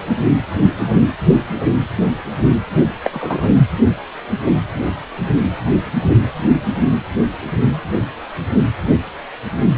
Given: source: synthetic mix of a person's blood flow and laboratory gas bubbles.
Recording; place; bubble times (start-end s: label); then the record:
Doppler ultrasound of blood flow; precordium
3.04-3.10 s: bubbles
3.13-3.49 s: bubbles
From the record:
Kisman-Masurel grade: 212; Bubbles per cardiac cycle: several, 3 to 8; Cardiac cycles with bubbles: 1 to 10%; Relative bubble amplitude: moderate (0.250 to 0.450); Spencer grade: 1 (occasional bubble signal discernible with the cardiac motion signal, with majority of cardiac periods free of bubbles); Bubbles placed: anywhere in the cardiac cycle